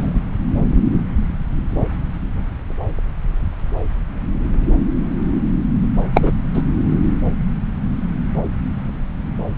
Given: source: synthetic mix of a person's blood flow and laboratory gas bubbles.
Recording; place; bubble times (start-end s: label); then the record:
Doppler ultrasound of blood flow; subclavian vein
0.00-0.20 s: bubbles
6.13-6.32 s: bubbles
6.54-6.62 s: bubbles
From the record:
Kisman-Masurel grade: 223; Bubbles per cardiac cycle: several, 3 to 8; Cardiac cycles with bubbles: 10 to 50%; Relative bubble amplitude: loud (0.450 to 0.775); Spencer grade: 2 (many but less than half of the cardiac periods contain bubble signals, singularly or in groups); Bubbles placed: anywhere in the cardiac cycle